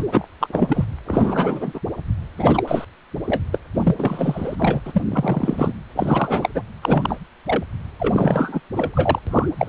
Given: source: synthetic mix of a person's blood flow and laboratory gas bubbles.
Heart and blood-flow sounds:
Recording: Doppler ultrasound of blood flow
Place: precordium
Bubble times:
0.00-0.04 s: bubbles
0.12-0.26 s: bubbles
0.40-0.84 s: bubbles
1.06-1.79 s: bubbles
2.37-2.63 s: bubbles
2.67-2.85 s: bubbles
3.25-3.41 s: bubbles
3.52-3.58 s: bubbles
3.74-3.94 s: bubbles
3.98-4.56 s: bubbles
4.59-4.81 s: bubbles
4.85-5.02 s: bubbles
5.10-5.74 s: bubbles
5.95-6.49 s: bubbles
6.55-6.62 s: bubbles
6.82-7.19 s: bubbles
7.45-7.64 s: bubbles
8.00-8.60 s: bubbles
8.76-9.19 s: bubbles
9.27-9.50 s: bubbles
9.58-9.69 s: bubbles
From the record:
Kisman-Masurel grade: 342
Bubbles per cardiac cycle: rolling drumbeat, 9 or more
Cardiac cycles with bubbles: 100%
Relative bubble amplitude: moderate (0.250 to 0.450)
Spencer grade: 3 (all of the cardiac periods contain showers or single bubble signals, but not dominating or overriding the cardiac motion signals)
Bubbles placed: anywhere in the cardiac cycle

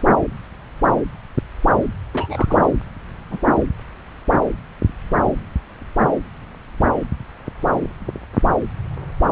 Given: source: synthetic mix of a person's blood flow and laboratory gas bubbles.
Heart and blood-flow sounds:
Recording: Doppler ultrasound of blood flow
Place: subclavian vein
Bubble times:
2.13-2.71 s: bubbles
3.31-3.39 s: bubbles
From the record:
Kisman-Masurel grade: 122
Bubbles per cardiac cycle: 1 to 2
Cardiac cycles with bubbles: 10 to 50%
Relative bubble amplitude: moderate (0.250 to 0.450)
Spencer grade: 2 (many but less than half of the cardiac periods contain bubble signals, singularly or in groups)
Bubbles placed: anywhere in the cardiac cycle

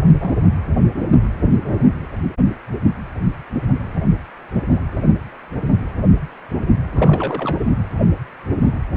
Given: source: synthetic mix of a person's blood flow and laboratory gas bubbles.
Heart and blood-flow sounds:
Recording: Doppler ultrasound of blood flow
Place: precordium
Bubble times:
0.03-0.36 s: bubbles
6.95-7.57 s: bubbles
7.62-7.71 s: bubbles
From the record:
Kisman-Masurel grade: 221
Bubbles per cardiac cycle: several, 3 to 8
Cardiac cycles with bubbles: 10 to 50%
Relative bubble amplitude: barely perceptible (0.100 to 0.250)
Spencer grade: 2 (many but less than half of the cardiac periods contain bubble signals, singularly or in groups)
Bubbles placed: anywhere in the cardiac cycle

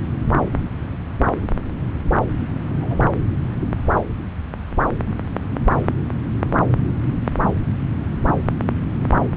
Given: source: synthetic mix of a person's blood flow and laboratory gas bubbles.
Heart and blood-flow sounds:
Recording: Doppler ultrasound of blood flow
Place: subclavian vein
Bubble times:
2.69-3.10 s: bubbles
From the record:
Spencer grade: 2 (many but less than half of the cardiac periods contain bubble signals, singularly or in groups)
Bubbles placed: anywhere in the cardiac cycle

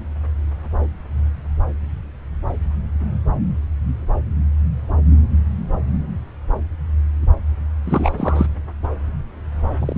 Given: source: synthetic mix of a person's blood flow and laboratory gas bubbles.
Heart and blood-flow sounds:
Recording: Doppler ultrasound of blood flow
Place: subclavian vein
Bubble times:
7.84-8.47 s: bubbles
9.79-9.98 s: bubbles
From the record:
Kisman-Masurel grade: 222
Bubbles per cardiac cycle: several, 3 to 8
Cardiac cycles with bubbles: 10 to 50%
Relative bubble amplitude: moderate (0.250 to 0.450)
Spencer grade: 2 (many but less than half of the cardiac periods contain bubble signals, singularly or in groups)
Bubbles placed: anywhere in the cardiac cycle

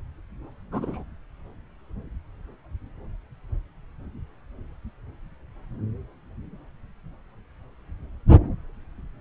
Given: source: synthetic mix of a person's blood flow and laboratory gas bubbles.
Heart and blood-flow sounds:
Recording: Doppler ultrasound of blood flow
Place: subclavian vein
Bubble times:
0.72-1.03 s: bubbles
From the record:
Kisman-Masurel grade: 112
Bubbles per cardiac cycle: 1 to 2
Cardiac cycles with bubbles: 1 to 10%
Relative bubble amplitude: moderate (0.250 to 0.450)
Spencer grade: 1 (occasional bubble signal discernible with the cardiac motion signal, with majority of cardiac periods free of bubbles)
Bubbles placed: anywhere in the cardiac cycle

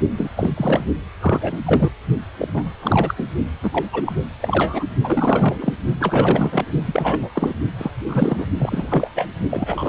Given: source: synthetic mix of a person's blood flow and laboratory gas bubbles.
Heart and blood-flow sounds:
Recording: Doppler ultrasound of blood flow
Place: precordium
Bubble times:
0.11-0.29 s: bubbles
0.36-0.50 s: bubbles
0.56-0.84 s: bubbles
1.21-1.61 s: bubbles
1.65-1.90 s: bubbles
2.39-2.48 s: bubbles
2.54-2.63 s: bubbles
2.82-3.15 s: bubbles
3.17-3.27 s: bubbles
3.62-3.85 s: bubbles
3.93-4.12 s: bubbles
4.42-4.84 s: bubbles
5.04-5.74 s: bubbles
6.00-6.65 s: bubbles
6.85-7.29 s: bubbles
7.33-7.54 s: bubbles
7.78-7.91 s: bubbles
8.07-8.46 s: bubbles
8.59-9.09 s: bubbles
9.15-9.27 s: bubbles
9.50-9.89 s: bubbles
From the record:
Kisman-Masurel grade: 343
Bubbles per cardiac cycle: rolling drumbeat, 9 or more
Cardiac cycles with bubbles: 100%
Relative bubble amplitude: loud (0.450 to 0.775)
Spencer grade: 3 (all of the cardiac periods contain showers or single bubble signals, but not dominating or overriding the cardiac motion signals)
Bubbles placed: only in the low amplitude regions of the cardiac cycle

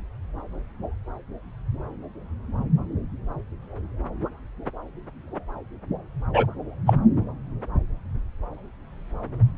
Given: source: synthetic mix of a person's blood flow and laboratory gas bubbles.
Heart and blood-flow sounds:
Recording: Doppler ultrasound of blood flow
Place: subclavian vein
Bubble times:
6.33-6.46 s: bubbles
6.86-6.94 s: bubbles
From the record:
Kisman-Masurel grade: 113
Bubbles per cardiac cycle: 1 to 2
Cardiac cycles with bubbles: 1 to 10%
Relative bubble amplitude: loud (0.450 to 0.775)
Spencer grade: 1 (occasional bubble signal discernible with the cardiac motion signal, with majority of cardiac periods free of bubbles)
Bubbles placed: anywhere in the cardiac cycle

